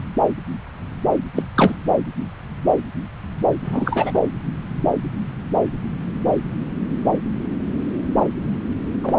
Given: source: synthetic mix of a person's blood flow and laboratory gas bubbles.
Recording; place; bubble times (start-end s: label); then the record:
Doppler ultrasound of blood flow; subclavian vein
0.00-0.02 s: bubbles
1.35-1.42 s: bubbles
1.54-1.75 s: bubbles
3.64-4.19 s: bubbles
9.03-9.19 s: bubbles
From the record:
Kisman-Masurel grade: 223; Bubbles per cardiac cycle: several, 3 to 8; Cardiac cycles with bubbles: 10 to 50%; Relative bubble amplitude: loud (0.450 to 0.775); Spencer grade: 2 (many but less than half of the cardiac periods contain bubble signals, singularly or in groups); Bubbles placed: anywhere in the cardiac cycle